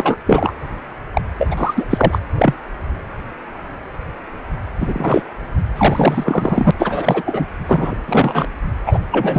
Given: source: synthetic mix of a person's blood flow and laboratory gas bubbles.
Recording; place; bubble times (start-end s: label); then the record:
Doppler ultrasound of blood flow; precordium
0.00-0.16 s: bubbles
0.26-0.54 s: bubbles
1.14-1.21 s: bubbles
1.38-1.48 s: bubbles
1.50-1.85 s: bubbles
1.91-2.19 s: bubbles
2.35-2.54 s: bubbles
4.80-5.22 s: bubbles
5.75-6.71 s: bubbles
6.79-7.23 s: bubbles
7.25-7.45 s: bubbles
7.66-7.95 s: bubbles
8.06-8.46 s: bubbles
8.86-8.99 s: bubbles
9.12-9.39 s: bubbles
From the record:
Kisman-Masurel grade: 333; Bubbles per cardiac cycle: rolling drumbeat, 9 or more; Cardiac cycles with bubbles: 50 to 99%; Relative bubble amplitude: loud (0.450 to 0.775); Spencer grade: 3 (all of the cardiac periods contain showers or single bubble signals, but not dominating or overriding the cardiac motion signals); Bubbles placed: anywhere in the cardiac cycle